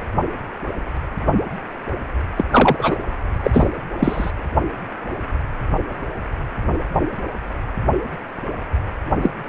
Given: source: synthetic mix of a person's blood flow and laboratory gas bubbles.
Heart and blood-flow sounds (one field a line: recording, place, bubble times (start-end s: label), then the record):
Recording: Doppler ultrasound of blood flow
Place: precordium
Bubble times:
2.38-2.46 s: bubbles
2.51-2.97 s: bubbles
3.43-3.69 s: bubbles
3.99-4.30 s: bubbles
9.21-9.30 s: bubbles
From the record:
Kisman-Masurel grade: 223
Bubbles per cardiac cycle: several, 3 to 8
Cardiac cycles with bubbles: 10 to 50%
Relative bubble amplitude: loud (0.450 to 0.775)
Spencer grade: 2 (many but less than half of the cardiac periods contain bubble signals, singularly or in groups)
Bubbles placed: anywhere in the cardiac cycle